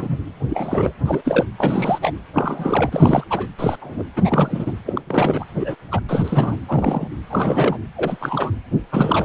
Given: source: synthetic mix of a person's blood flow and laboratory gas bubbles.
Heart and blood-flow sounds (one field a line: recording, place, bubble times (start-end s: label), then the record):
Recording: Doppler ultrasound of blood flow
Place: precordium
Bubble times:
0.00-0.18 s: bubbles
0.48-0.93 s: bubbles
1.05-1.21 s: bubbles
1.24-1.46 s: bubbles
1.57-2.12 s: bubbles
2.33-3.24 s: bubbles
3.30-3.47 s: bubbles
3.58-3.77 s: bubbles
3.80-4.04 s: bubbles
4.15-4.72 s: bubbles
4.85-5.01 s: bubbles
5.06-5.44 s: bubbles
5.59-5.75 s: bubbles
5.91-6.00 s: bubbles
6.08-6.56 s: bubbles
6.68-7.08 s: bubbles
7.29-7.79 s: bubbles
7.96-8.17 s: bubbles
8.20-8.52 s: bubbles
8.91-9.25 s: bubbles
From the record:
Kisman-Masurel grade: 243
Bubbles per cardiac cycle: several, 3 to 8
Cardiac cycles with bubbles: 100%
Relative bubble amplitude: loud (0.450 to 0.775)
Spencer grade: 3 (all of the cardiac periods contain showers or single bubble signals, but not dominating or overriding the cardiac motion signals)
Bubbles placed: anywhere in the cardiac cycle